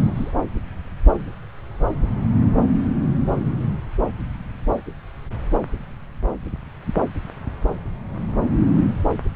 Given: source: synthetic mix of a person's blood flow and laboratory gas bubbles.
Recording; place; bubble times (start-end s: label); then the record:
Doppler ultrasound of blood flow; subclavian vein
0.00-0.31 s: bubbles
From the record:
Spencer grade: 1 (occasional bubble signal discernible with the cardiac motion signal, with majority of cardiac periods free of bubbles); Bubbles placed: anywhere in the cardiac cycle